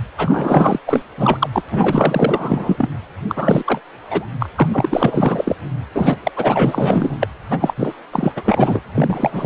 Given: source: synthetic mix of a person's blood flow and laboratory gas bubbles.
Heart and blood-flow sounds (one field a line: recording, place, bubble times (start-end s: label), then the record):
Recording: Doppler ultrasound of blood flow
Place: precordium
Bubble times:
0.17-0.79 s: bubbles
0.86-1.04 s: bubbles
1.18-1.50 s: bubbles
1.52-1.62 s: bubbles
1.68-2.90 s: bubbles
3.28-3.81 s: bubbles
4.10-4.27 s: bubbles
4.39-4.48 s: bubbles
4.56-5.56 s: bubbles
5.95-6.16 s: bubbles
6.24-6.32 s: bubbles
6.36-7.18 s: bubbles
7.20-7.28 s: bubbles
7.50-7.74 s: bubbles
7.77-7.94 s: bubbles
8.12-8.33 s: bubbles
8.36-8.81 s: bubbles
8.94-9.46 s: bubbles
From the record:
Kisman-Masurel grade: 444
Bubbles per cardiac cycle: continuous sound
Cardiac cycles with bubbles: 100%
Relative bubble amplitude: maximal (0.775 to 0.999)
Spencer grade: 4 (maximum detectable bubble signal sounding continuously throughout systole and diastole of every cardiac period, and overriding the amplitude of the normal cardiac signals)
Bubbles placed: anywhere in the cardiac cycle